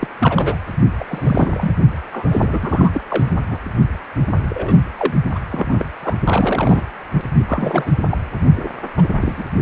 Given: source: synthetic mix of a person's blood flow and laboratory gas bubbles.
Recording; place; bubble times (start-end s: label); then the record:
Doppler ultrasound of blood flow; precordium
0.00-0.07 s: bubbles
0.18-0.57 s: bubbles
0.99-1.04 s: bubbles
1.07-1.73 s: bubbles
2.12-3.01 s: bubbles
3.09-3.32 s: bubbles
3.50-3.58 s: bubbles
4.48-4.83 s: bubbles
4.97-5.14 s: bubbles
5.34-5.39 s: bubbles
5.50-5.84 s: bubbles
6.02-6.16 s: bubbles
6.24-6.82 s: bubbles
7.48-7.91 s: bubbles
8.11-8.18 s: bubbles
8.55-8.69 s: bubbles
8.97-9.07 s: bubbles
9.21-9.49 s: bubbles
From the record:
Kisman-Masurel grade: 242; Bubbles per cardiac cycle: several, 3 to 8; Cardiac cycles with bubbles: 100%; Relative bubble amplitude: moderate (0.250 to 0.450); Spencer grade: 3 (all of the cardiac periods contain showers or single bubble signals, but not dominating or overriding the cardiac motion signals); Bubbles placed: only in the low amplitude regions of the cardiac cycle